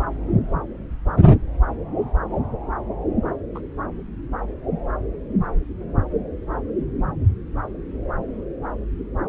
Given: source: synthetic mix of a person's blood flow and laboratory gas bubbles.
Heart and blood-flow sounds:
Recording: Doppler ultrasound of blood flow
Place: subclavian vein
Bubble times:
3.54-3.60 s: bubbles
From the record:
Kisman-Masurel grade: 121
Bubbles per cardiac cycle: 1 to 2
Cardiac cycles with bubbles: 10 to 50%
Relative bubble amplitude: barely perceptible (0.100 to 0.250)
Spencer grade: 2 (many but less than half of the cardiac periods contain bubble signals, singularly or in groups)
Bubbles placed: anywhere in the cardiac cycle

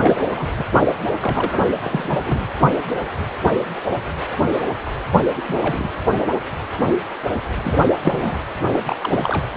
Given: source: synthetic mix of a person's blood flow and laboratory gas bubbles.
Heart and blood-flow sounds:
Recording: Doppler ultrasound of blood flow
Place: precordium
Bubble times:
0.01-0.25 s: bubbles
0.36-0.51 s: bubbles
0.56-0.65 s: bubbles
0.72-0.79 s: bubbles
0.81-0.86 s: bubbles
1.21-1.67 s: bubbles
1.82-2.19 s: bubbles
2.23-2.45 s: bubbles
5.36-5.89 s: bubbles
7.63-7.78 s: bubbles
8.02-8.38 s: bubbles
8.72-8.79 s: bubbles
8.85-8.96 s: bubbles
9.01-9.46 s: bubbles
From the record:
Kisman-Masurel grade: 232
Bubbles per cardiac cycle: several, 3 to 8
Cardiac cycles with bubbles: 50 to 99%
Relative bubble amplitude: moderate (0.250 to 0.450)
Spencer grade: 3 (all of the cardiac periods contain showers or single bubble signals, but not dominating or overriding the cardiac motion signals)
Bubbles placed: anywhere in the cardiac cycle

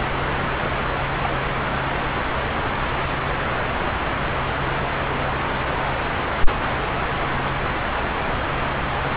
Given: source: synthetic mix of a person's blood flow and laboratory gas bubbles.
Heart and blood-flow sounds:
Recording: Doppler ultrasound of blood flow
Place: subclavian vein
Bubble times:
0.59-0.69 s: bubbles
1.23-1.28 s: bubbles
From the record:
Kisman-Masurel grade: 121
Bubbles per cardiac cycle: 1 to 2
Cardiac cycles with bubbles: 10 to 50%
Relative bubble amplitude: barely perceptible (0.100 to 0.250)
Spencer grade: 2 (many but less than half of the cardiac periods contain bubble signals, singularly or in groups)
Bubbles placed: anywhere in the cardiac cycle

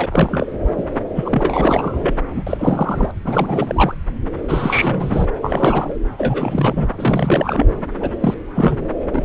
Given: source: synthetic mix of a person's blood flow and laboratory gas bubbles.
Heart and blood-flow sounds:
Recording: Doppler ultrasound of blood flow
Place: subclavian vein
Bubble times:
0.00-0.06 s: bubbles
0.10-0.53 s: bubbles
0.77-0.83 s: bubbles
1.15-2.15 s: bubbles
2.29-2.43 s: bubbles
2.46-3.11 s: bubbles
3.24-3.93 s: bubbles
4.48-5.25 s: bubbles
5.42-5.97 s: bubbles
6.18-6.89 s: bubbles
6.96-7.66 s: bubbles
7.99-8.11 s: bubbles
8.21-8.35 s: bubbles
8.55-8.86 s: bubbles
9.14-9.22 s: bubbles
From the record:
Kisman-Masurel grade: 342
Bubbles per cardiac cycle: rolling drumbeat, 9 or more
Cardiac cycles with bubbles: 100%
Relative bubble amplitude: moderate (0.250 to 0.450)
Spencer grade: 3 (all of the cardiac periods contain showers or single bubble signals, but not dominating or overriding the cardiac motion signals)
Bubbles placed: anywhere in the cardiac cycle

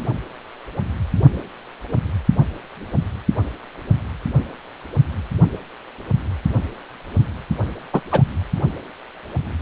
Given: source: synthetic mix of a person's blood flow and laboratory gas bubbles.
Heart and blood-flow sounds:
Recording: Doppler ultrasound of blood flow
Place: precordium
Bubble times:
7.93-8.00 s: bubbles
8.12-8.23 s: bubbles
From the record:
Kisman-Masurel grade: 113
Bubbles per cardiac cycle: 1 to 2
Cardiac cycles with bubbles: 1 to 10%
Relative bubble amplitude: loud (0.450 to 0.775)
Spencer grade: 1 (occasional bubble signal discernible with the cardiac motion signal, with majority of cardiac periods free of bubbles)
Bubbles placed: only in the low amplitude regions of the cardiac cycle

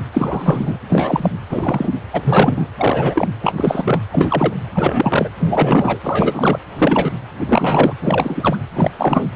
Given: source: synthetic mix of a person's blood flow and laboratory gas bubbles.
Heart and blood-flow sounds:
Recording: Doppler ultrasound of blood flow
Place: precordium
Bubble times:
0.13-0.77 s: bubbles
0.89-1.30 s: bubbles
1.49-1.99 s: bubbles
2.12-2.68 s: bubbles
2.77-3.29 s: bubbles
3.43-3.53 s: bubbles
3.56-4.01 s: bubbles
4.10-4.53 s: bubbles
4.74-5.29 s: bubbles
5.39-5.99 s: bubbles
6.03-6.59 s: bubbles
6.78-7.15 s: bubbles
7.39-7.93 s: bubbles
8.00-8.59 s: bubbles
8.75-8.91 s: bubbles
8.97-9.28 s: bubbles
From the record:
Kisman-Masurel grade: 343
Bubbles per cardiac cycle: rolling drumbeat, 9 or more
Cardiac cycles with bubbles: 100%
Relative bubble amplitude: loud (0.450 to 0.775)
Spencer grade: 3 (all of the cardiac periods contain showers or single bubble signals, but not dominating or overriding the cardiac motion signals)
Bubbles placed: anywhere in the cardiac cycle

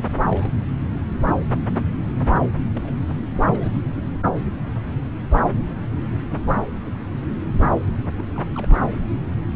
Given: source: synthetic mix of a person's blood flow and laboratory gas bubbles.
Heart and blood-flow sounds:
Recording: Doppler ultrasound of blood flow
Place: subclavian vein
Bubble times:
0.15-0.25 s: bubbles
0.31-0.50 s: bubbles
2.73-2.93 s: bubbles
3.48-3.71 s: bubbles
8.18-8.23 s: bubbles
8.35-8.45 s: bubbles
8.55-8.82 s: bubbles
8.85-8.99 s: bubbles
From the record:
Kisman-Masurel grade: 221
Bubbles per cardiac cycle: several, 3 to 8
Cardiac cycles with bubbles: 10 to 50%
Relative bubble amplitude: barely perceptible (0.100 to 0.250)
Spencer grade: 2 (many but less than half of the cardiac periods contain bubble signals, singularly or in groups)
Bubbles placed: anywhere in the cardiac cycle

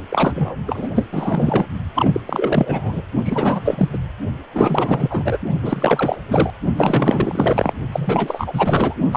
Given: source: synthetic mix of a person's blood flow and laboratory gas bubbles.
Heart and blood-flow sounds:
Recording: Doppler ultrasound of blood flow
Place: precordium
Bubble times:
0.09-0.56 s: bubbles
0.67-0.89 s: bubbles
0.94-1.05 s: bubbles
1.12-1.67 s: bubbles
1.94-2.21 s: bubbles
2.25-3.02 s: bubbles
3.22-3.89 s: bubbles
3.92-3.98 s: bubbles
4.53-5.38 s: bubbles
5.62-6.22 s: bubbles
6.28-6.50 s: bubbles
6.76-7.73 s: bubbles
7.92-8.94 s: bubbles
9.12-9.17 s: bubbles
From the record:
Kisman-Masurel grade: 444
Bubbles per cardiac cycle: continuous sound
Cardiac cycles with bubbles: 100%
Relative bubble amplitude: maximal (0.775 to 0.999)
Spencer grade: 4 (maximum detectable bubble signal sounding continuously throughout systole and diastole of every cardiac period, and overriding the amplitude of the normal cardiac signals)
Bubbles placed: only in the low amplitude regions of the cardiac cycle

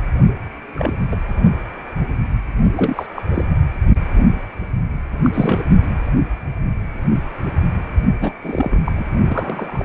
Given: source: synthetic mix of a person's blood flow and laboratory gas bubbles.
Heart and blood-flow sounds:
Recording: Doppler ultrasound of blood flow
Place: precordium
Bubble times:
0.74-0.94 s: bubbles
1.11-1.16 s: bubbles
2.77-3.06 s: bubbles
3.15-3.22 s: bubbles
3.34-3.42 s: bubbles
5.24-5.30 s: bubbles
5.33-5.63 s: bubbles
8.21-8.33 s: bubbles
8.41-8.79 s: bubbles
8.85-8.92 s: bubbles
8.96-9.05 s: bubbles
9.28-9.85 s: bubbles
From the record:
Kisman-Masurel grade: 232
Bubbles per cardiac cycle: several, 3 to 8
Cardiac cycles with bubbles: 50 to 99%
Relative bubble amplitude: moderate (0.250 to 0.450)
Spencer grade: 3 (all of the cardiac periods contain showers or single bubble signals, but not dominating or overriding the cardiac motion signals)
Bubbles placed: only in the low amplitude regions of the cardiac cycle

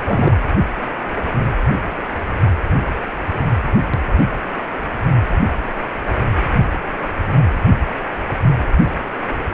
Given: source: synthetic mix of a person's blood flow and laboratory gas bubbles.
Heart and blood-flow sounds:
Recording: Doppler ultrasound of blood flow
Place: precordium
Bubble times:
0.06-0.36 s: bubbles
From the record:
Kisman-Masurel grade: 212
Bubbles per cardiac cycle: several, 3 to 8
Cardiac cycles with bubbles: 1 to 10%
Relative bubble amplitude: moderate (0.250 to 0.450)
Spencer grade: 1 (occasional bubble signal discernible with the cardiac motion signal, with majority of cardiac periods free of bubbles)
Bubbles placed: anywhere in the cardiac cycle

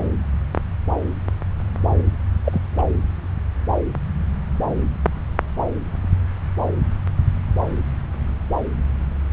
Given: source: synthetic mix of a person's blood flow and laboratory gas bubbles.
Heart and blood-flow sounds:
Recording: Doppler ultrasound of blood flow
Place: subclavian vein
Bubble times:
2.45-2.61 s: bubbles
2.78-2.82 s: bubbles
From the record:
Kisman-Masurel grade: 222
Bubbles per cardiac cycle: several, 3 to 8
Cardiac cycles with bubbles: 10 to 50%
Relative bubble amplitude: moderate (0.250 to 0.450)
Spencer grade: 2 (many but less than half of the cardiac periods contain bubble signals, singularly or in groups)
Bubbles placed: anywhere in the cardiac cycle

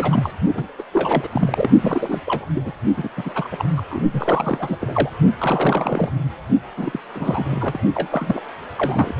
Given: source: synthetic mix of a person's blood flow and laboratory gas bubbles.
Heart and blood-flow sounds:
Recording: Doppler ultrasound of blood flow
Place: precordium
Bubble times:
0.00-0.31 s: bubbles
0.54-0.68 s: bubbles
0.79-0.83 s: bubbles
0.92-1.28 s: bubbles
1.32-1.71 s: bubbles
1.81-2.21 s: bubbles
2.27-2.46 s: bubbles
2.54-2.73 s: bubbles
2.96-3.09 s: bubbles
3.17-3.48 s: bubbles
3.52-3.66 s: bubbles
3.76-3.82 s: bubbles
3.90-4.03 s: bubbles
4.13-4.79 s: bubbles
4.81-5.09 s: bubbles
5.38-6.10 s: bubbles
6.77-7.00 s: bubbles
7.14-7.45 s: bubbles
7.50-7.79 s: bubbles
7.95-8.41 s: bubbles
8.75-9.14 s: bubbles
From the record:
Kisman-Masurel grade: 342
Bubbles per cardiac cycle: rolling drumbeat, 9 or more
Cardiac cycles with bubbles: 100%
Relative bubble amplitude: moderate (0.250 to 0.450)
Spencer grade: 3 (all of the cardiac periods contain showers or single bubble signals, but not dominating or overriding the cardiac motion signals)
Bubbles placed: only in the low amplitude regions of the cardiac cycle

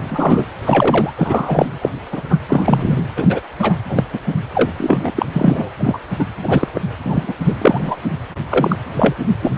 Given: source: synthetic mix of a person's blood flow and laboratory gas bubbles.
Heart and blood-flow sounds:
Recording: Doppler ultrasound of blood flow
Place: precordium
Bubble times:
0.09-0.46 s: bubbles
0.65-1.12 s: bubbles
1.16-1.66 s: bubbles
1.81-1.89 s: bubbles
2.12-2.22 s: bubbles
2.29-2.38 s: bubbles
2.48-3.02 s: bubbles
3.17-3.41 s: bubbles
3.59-3.75 s: bubbles
3.89-4.04 s: bubbles
4.13-4.20 s: bubbles
4.54-4.71 s: bubbles
4.78-5.12 s: bubbles
5.15-5.26 s: bubbles
5.33-5.70 s: bubbles
5.79-5.98 s: bubbles
6.19-6.25 s: bubbles
6.42-6.67 s: bubbles
6.75-6.81 s: bubbles
7.04-7.33 s: bubbles
7.40-7.54 s: bubbles
7.58-7.96 s: bubbles
8.50-8.76 s: bubbles
8.96-9.15 s: bubbles
9.42-9.58 s: bubbles
From the record:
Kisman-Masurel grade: 233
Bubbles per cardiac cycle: several, 3 to 8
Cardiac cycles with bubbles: 50 to 99%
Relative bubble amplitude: loud (0.450 to 0.775)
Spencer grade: 3 (all of the cardiac periods contain showers or single bubble signals, but not dominating or overriding the cardiac motion signals)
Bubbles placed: anywhere in the cardiac cycle

